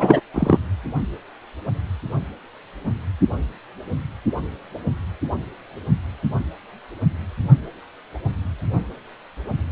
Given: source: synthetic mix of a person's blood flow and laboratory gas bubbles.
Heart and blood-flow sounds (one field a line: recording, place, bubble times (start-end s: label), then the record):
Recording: Doppler ultrasound of blood flow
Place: precordium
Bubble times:
0.00-0.20 s: bubbles
0.34-0.59 s: bubbles
From the record:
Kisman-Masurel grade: 213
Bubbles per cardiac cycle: several, 3 to 8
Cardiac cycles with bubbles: 1 to 10%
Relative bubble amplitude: loud (0.450 to 0.775)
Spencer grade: 1 (occasional bubble signal discernible with the cardiac motion signal, with majority of cardiac periods free of bubbles)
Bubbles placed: only in the low amplitude regions of the cardiac cycle